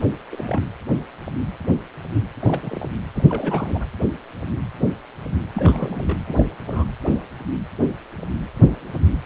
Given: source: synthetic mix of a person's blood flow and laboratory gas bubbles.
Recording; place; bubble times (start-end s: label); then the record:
Doppler ultrasound of blood flow; precordium
0.31-0.62 s: bubbles
2.40-2.89 s: bubbles
3.14-3.86 s: bubbles
5.54-6.18 s: bubbles
6.25-6.45 s: bubbles
6.67-6.85 s: bubbles
From the record:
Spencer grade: 2 (many but less than half of the cardiac periods contain bubble signals, singularly or in groups); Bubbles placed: anywhere in the cardiac cycle